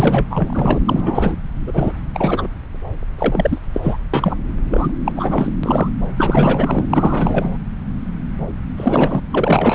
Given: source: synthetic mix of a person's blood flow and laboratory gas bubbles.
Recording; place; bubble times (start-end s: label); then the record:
Doppler ultrasound of blood flow; subclavian vein
0.00-0.26 s: bubbles
0.30-0.80 s: bubbles
0.85-1.35 s: bubbles
1.67-1.93 s: bubbles
2.14-2.48 s: bubbles
3.17-3.58 s: bubbles
3.73-3.96 s: bubbles
4.13-4.37 s: bubbles
4.71-4.92 s: bubbles
5.05-5.12 s: bubbles
5.16-5.50 s: bubbles
5.63-5.88 s: bubbles
6.17-6.85 s: bubbles
6.89-7.57 s: bubbles
8.77-9.21 s: bubbles
9.31-9.75 s: bubbles
From the record:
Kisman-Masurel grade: 333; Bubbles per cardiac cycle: rolling drumbeat, 9 or more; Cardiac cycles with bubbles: 50 to 99%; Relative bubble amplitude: loud (0.450 to 0.775); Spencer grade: 3 (all of the cardiac periods contain showers or single bubble signals, but not dominating or overriding the cardiac motion signals); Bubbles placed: anywhere in the cardiac cycle